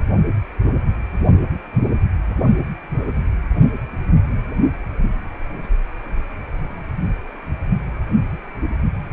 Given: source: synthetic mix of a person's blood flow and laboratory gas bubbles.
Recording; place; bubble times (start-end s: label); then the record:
Doppler ultrasound of blood flow; precordium
no bubbles
From the record:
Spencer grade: 0 (complete lack of bubble signals)